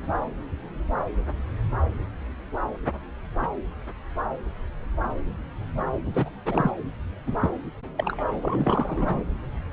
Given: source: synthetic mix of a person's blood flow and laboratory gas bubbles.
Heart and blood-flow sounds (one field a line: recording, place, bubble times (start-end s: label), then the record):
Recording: Doppler ultrasound of blood flow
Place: subclavian vein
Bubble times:
6.06-6.29 s: bubbles
6.46-6.71 s: bubbles
7.26-7.36 s: bubbles
7.42-7.49 s: bubbles
7.98-8.23 s: bubbles
8.41-9.23 s: bubbles
From the record:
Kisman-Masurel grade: 221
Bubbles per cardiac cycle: several, 3 to 8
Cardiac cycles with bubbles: 10 to 50%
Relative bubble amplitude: barely perceptible (0.100 to 0.250)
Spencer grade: 2 (many but less than half of the cardiac periods contain bubble signals, singularly or in groups)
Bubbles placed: anywhere in the cardiac cycle